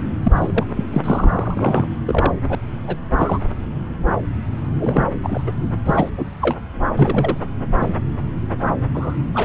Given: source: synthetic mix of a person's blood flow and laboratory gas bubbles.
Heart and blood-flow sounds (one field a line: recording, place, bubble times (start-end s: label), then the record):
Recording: Doppler ultrasound of blood flow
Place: subclavian vein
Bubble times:
0.23-0.32 s: bubbles
0.36-0.65 s: bubbles
0.76-0.85 s: bubbles
0.93-1.87 s: bubbles
2.06-2.32 s: bubbles
2.49-2.55 s: bubbles
2.87-2.96 s: bubbles
3.18-3.39 s: bubbles
4.79-5.04 s: bubbles
5.23-5.43 s: bubbles
5.46-5.51 s: bubbles
5.85-6.09 s: bubbles
6.17-6.25 s: bubbles
6.42-6.56 s: bubbles
6.96-7.37 s: bubbles
7.75-7.96 s: bubbles
8.94-9.14 s: bubbles
9.34-9.45 s: bubbles
From the record:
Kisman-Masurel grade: 232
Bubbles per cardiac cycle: several, 3 to 8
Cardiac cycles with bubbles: 50 to 99%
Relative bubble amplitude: moderate (0.250 to 0.450)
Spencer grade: 3 (all of the cardiac periods contain showers or single bubble signals, but not dominating or overriding the cardiac motion signals)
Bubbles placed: anywhere in the cardiac cycle